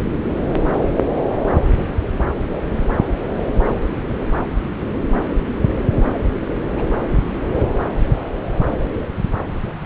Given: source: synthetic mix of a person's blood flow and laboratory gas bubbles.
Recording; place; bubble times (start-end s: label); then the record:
Doppler ultrasound of blood flow; subclavian vein
0.00-0.21 s: bubbles
3.08-3.15 s: bubbles
6.75-6.85 s: bubbles
7.55-7.66 s: bubbles
8.58-8.65 s: bubbles
8.74-8.90 s: bubbles
From the record:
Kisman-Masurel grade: 121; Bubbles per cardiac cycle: 1 to 2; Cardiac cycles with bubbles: 10 to 50%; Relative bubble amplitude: barely perceptible (0.100 to 0.250); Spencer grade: 2 (many but less than half of the cardiac periods contain bubble signals, singularly or in groups); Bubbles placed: anywhere in the cardiac cycle